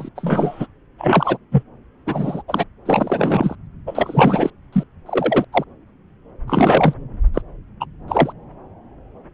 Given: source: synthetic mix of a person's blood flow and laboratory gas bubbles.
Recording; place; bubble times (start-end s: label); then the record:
Doppler ultrasound of blood flow; subclavian vein
0.00-0.09 s: bubbles
0.16-0.66 s: bubbles
0.98-1.38 s: bubbles
1.51-1.63 s: bubbles
2.06-2.42 s: bubbles
2.48-2.64 s: bubbles
2.85-3.55 s: bubbles
3.87-4.50 s: bubbles
4.72-4.83 s: bubbles
5.06-5.45 s: bubbles
5.52-5.64 s: bubbles
6.47-6.94 s: bubbles
7.34-7.42 s: bubbles
7.80-7.85 s: bubbles
8.08-8.33 s: bubbles
From the record:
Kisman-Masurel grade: 233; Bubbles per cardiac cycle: several, 3 to 8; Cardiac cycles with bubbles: 50 to 99%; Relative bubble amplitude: loud (0.450 to 0.775); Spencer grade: 3 (all of the cardiac periods contain showers or single bubble signals, but not dominating or overriding the cardiac motion signals); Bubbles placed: anywhere in the cardiac cycle